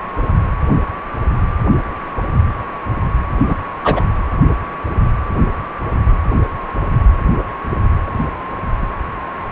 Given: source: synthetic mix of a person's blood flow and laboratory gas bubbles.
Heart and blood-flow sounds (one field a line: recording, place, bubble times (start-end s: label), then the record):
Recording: Doppler ultrasound of blood flow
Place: precordium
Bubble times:
3.48-3.55 s: bubbles
3.83-4.04 s: bubbles
From the record:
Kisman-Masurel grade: 113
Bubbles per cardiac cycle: 1 to 2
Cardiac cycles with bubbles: 1 to 10%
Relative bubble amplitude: loud (0.450 to 0.775)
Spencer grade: 1 (occasional bubble signal discernible with the cardiac motion signal, with majority of cardiac periods free of bubbles)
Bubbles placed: anywhere in the cardiac cycle